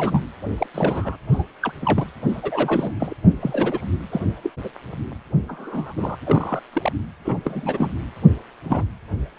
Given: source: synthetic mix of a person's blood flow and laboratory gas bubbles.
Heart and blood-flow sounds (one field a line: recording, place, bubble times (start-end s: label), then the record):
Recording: Doppler ultrasound of blood flow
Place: precordium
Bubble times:
0.00-0.23 s: bubbles
0.57-0.66 s: bubbles
0.74-1.17 s: bubbles
1.32-1.44 s: bubbles
1.62-1.72 s: bubbles
1.82-2.06 s: bubbles
2.29-2.92 s: bubbles
3.00-3.14 s: bubbles
3.41-3.88 s: bubbles
4.12-4.21 s: bubbles
4.43-4.50 s: bubbles
4.63-4.69 s: bubbles
5.48-5.94 s: bubbles
5.97-6.17 s: bubbles
6.26-6.60 s: bubbles
6.73-6.92 s: bubbles
7.25-7.41 s: bubbles
7.45-7.92 s: bubbles
8.64-8.86 s: bubbles
From the record:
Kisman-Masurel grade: 232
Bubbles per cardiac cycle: several, 3 to 8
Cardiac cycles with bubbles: 50 to 99%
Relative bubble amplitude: moderate (0.250 to 0.450)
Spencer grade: 3 (all of the cardiac periods contain showers or single bubble signals, but not dominating or overriding the cardiac motion signals)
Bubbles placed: anywhere in the cardiac cycle